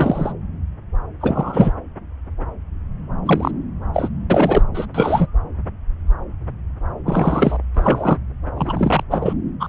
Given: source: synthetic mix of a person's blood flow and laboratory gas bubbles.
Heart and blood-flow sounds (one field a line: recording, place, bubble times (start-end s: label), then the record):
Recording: Doppler ultrasound of blood flow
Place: subclavian vein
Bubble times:
0.00-0.32 s: bubbles
1.21-1.73 s: bubbles
3.25-3.51 s: bubbles
3.94-4.09 s: bubbles
4.30-4.62 s: bubbles
4.74-4.86 s: bubbles
4.94-5.27 s: bubbles
7.05-7.58 s: bubbles
7.75-8.17 s: bubbles
8.57-9.04 s: bubbles
9.10-9.34 s: bubbles
9.60-9.69 s: bubbles
From the record:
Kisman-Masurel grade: 233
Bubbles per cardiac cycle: several, 3 to 8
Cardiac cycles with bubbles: 50 to 99%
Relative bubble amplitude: loud (0.450 to 0.775)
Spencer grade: 3 (all of the cardiac periods contain showers or single bubble signals, but not dominating or overriding the cardiac motion signals)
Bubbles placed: anywhere in the cardiac cycle